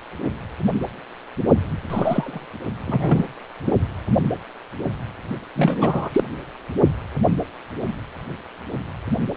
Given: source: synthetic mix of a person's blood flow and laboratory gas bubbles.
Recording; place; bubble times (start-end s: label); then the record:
Doppler ultrasound of blood flow; precordium
1.90-2.47 s: bubbles
2.86-3.27 s: bubbles
3.66-3.71 s: bubbles
5.55-6.23 s: bubbles
From the record:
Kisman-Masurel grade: 223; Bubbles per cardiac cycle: several, 3 to 8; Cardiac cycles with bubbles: 10 to 50%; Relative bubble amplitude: loud (0.450 to 0.775); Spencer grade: 2 (many but less than half of the cardiac periods contain bubble signals, singularly or in groups); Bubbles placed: only in the low amplitude regions of the cardiac cycle